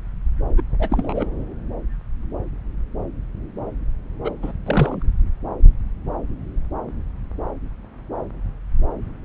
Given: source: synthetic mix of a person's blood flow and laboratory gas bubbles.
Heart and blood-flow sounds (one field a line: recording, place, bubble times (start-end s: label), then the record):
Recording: Doppler ultrasound of blood flow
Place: subclavian vein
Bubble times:
0.56-0.62 s: bubbles
0.79-1.25 s: bubbles
4.24-4.32 s: bubbles
4.42-4.52 s: bubbles
4.66-5.02 s: bubbles
From the record:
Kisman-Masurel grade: 222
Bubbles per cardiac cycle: several, 3 to 8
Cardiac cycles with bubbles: 10 to 50%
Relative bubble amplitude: moderate (0.250 to 0.450)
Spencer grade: 2 (many but less than half of the cardiac periods contain bubble signals, singularly or in groups)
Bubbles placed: anywhere in the cardiac cycle